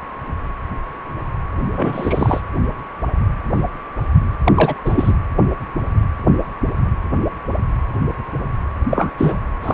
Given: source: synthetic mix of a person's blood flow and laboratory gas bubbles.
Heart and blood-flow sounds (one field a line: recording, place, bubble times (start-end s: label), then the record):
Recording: Doppler ultrasound of blood flow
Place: precordium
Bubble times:
1.73-2.40 s: bubbles
4.45-4.75 s: bubbles
4.85-5.12 s: bubbles
8.90-9.11 s: bubbles
9.18-9.39 s: bubbles
9.62-9.74 s: bubbles
From the record:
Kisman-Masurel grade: 223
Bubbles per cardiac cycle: several, 3 to 8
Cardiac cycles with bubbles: 10 to 50%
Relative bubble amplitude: loud (0.450 to 0.775)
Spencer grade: 2 (many but less than half of the cardiac periods contain bubble signals, singularly or in groups)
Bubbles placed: anywhere in the cardiac cycle